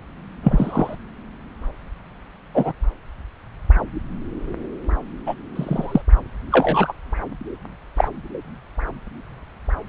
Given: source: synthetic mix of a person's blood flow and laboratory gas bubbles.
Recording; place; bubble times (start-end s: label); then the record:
Doppler ultrasound of blood flow; subclavian vein
0.43-0.96 s: bubbles
2.54-2.72 s: bubbles
5.26-5.34 s: bubbles
5.55-6.02 s: bubbles
6.50-6.93 s: bubbles
7.97-8.08 s: bubbles
From the record:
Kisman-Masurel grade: 123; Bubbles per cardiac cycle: 1 to 2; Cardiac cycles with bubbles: 10 to 50%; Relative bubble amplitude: loud (0.450 to 0.775); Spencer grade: 2 (many but less than half of the cardiac periods contain bubble signals, singularly or in groups); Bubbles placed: anywhere in the cardiac cycle